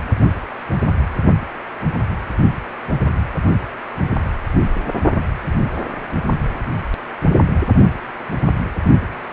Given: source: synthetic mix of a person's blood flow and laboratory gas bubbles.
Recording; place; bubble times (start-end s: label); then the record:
Doppler ultrasound of blood flow; precordium
no bubbles
From the record:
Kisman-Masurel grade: 000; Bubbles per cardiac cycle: 0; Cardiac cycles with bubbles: 0%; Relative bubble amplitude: no bubbles discernible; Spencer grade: 0 (complete lack of bubble signals)